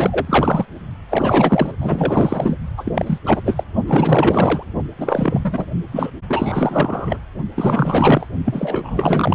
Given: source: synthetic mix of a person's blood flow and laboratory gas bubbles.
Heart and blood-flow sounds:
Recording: Doppler ultrasound of blood flow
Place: precordium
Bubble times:
0.00-0.65 s: bubbles
1.09-1.72 s: bubbles
1.80-2.56 s: bubbles
2.77-3.18 s: bubbles
3.25-3.42 s: bubbles
3.45-3.63 s: bubbles
3.86-4.63 s: bubbles
4.97-5.41 s: bubbles
5.44-5.66 s: bubbles
5.91-6.11 s: bubbles
6.28-7.18 s: bubbles
7.55-8.28 s: bubbles
8.45-9.35 s: bubbles
From the record:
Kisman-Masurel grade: 444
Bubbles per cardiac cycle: continuous sound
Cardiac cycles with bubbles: 100%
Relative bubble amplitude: maximal (0.775 to 0.999)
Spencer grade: 4 (maximum detectable bubble signal sounding continuously throughout systole and diastole of every cardiac period, and overriding the amplitude of the normal cardiac signals)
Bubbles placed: only in the low amplitude regions of the cardiac cycle

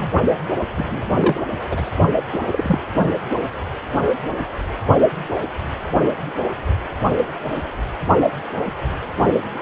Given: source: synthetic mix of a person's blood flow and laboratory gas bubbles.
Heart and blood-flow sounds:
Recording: Doppler ultrasound of blood flow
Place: precordium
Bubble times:
0.00-0.10 s: bubbles
0.77-1.09 s: bubbles
1.13-1.41 s: bubbles
1.69-1.90 s: bubbles
2.31-2.38 s: bubbles
2.50-2.79 s: bubbles
From the record:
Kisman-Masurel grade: 222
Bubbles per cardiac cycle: several, 3 to 8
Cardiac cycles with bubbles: 10 to 50%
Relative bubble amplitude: moderate (0.250 to 0.450)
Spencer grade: 2 (many but less than half of the cardiac periods contain bubble signals, singularly or in groups)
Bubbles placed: only in the low amplitude regions of the cardiac cycle

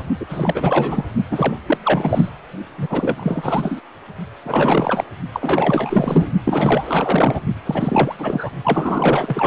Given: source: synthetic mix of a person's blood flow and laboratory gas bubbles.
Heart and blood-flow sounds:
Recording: Doppler ultrasound of blood flow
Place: precordium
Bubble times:
0.00-0.03 s: bubbles
0.19-0.26 s: bubbles
0.29-1.05 s: bubbles
1.30-1.56 s: bubbles
1.67-1.77 s: bubbles
1.84-2.29 s: bubbles
2.77-3.81 s: bubbles
4.44-5.04 s: bubbles
5.32-6.30 s: bubbles
6.44-7.40 s: bubbles
7.65-8.15 s: bubbles
8.18-8.49 s: bubbles
8.64-9.47 s: bubbles
From the record:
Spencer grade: 4 (maximum detectable bubble signal sounding continuously throughout systole and diastole of every cardiac period, and overriding the amplitude of the normal cardiac signals)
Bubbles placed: only in the low amplitude regions of the cardiac cycle

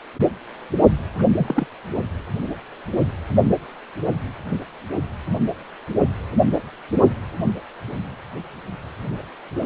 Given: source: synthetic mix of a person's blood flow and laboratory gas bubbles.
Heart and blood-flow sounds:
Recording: Doppler ultrasound of blood flow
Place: precordium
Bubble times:
1.18-1.27 s: bubbles
1.32-1.67 s: bubbles
From the record:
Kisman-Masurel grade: 212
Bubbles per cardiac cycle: several, 3 to 8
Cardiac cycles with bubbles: 1 to 10%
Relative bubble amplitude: moderate (0.250 to 0.450)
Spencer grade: 1 (occasional bubble signal discernible with the cardiac motion signal, with majority of cardiac periods free of bubbles)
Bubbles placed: only in the low amplitude regions of the cardiac cycle

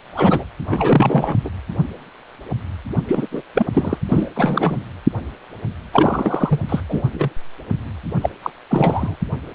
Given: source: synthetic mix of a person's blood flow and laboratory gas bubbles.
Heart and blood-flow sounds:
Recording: Doppler ultrasound of blood flow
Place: precordium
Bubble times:
0.12-0.44 s: bubbles
0.70-1.36 s: bubbles
1.44-1.50 s: bubbles
2.96-3.02 s: bubbles
3.07-3.27 s: bubbles
3.31-3.42 s: bubbles
3.54-3.66 s: bubbles
3.73-3.98 s: bubbles
4.08-4.29 s: bubbles
4.35-4.78 s: bubbles
5.93-6.60 s: bubbles
6.69-6.81 s: bubbles
6.89-7.03 s: bubbles
7.14-7.29 s: bubbles
8.21-8.29 s: bubbles
8.42-8.50 s: bubbles
8.70-9.15 s: bubbles
From the record:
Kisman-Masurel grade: 333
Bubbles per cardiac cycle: rolling drumbeat, 9 or more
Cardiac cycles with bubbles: 50 to 99%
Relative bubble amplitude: loud (0.450 to 0.775)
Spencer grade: 3 (all of the cardiac periods contain showers or single bubble signals, but not dominating or overriding the cardiac motion signals)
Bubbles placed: anywhere in the cardiac cycle

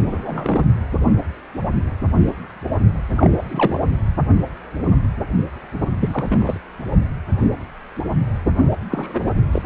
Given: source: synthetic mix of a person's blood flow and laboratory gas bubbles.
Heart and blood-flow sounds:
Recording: Doppler ultrasound of blood flow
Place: precordium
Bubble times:
0.08-0.65 s: bubbles
3.17-3.87 s: bubbles
6.00-6.58 s: bubbles
8.90-9.30 s: bubbles
9.37-9.42 s: bubbles
9.51-9.65 s: bubbles
From the record:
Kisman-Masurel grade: 222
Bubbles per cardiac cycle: several, 3 to 8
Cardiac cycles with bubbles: 10 to 50%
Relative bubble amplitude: moderate (0.250 to 0.450)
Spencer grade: 2 (many but less than half of the cardiac periods contain bubble signals, singularly or in groups)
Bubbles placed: only in the low amplitude regions of the cardiac cycle

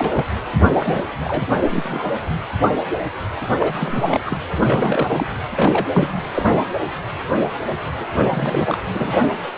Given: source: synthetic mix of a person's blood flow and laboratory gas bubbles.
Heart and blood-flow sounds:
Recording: Doppler ultrasound of blood flow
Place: precordium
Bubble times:
0.00-0.25 s: bubbles
0.74-1.02 s: bubbles
1.24-1.47 s: bubbles
1.60-2.04 s: bubbles
3.58-4.21 s: bubbles
4.25-4.38 s: bubbles
4.59-5.27 s: bubbles
5.55-5.86 s: bubbles
5.92-6.21 s: bubbles
6.34-6.57 s: bubbles
8.01-8.06 s: bubbles
8.19-8.27 s: bubbles
8.30-8.78 s: bubbles
8.91-9.16 s: bubbles
From the record:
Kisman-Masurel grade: 333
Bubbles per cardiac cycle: rolling drumbeat, 9 or more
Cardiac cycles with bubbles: 50 to 99%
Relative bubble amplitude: loud (0.450 to 0.775)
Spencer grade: 3 (all of the cardiac periods contain showers or single bubble signals, but not dominating or overriding the cardiac motion signals)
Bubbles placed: anywhere in the cardiac cycle

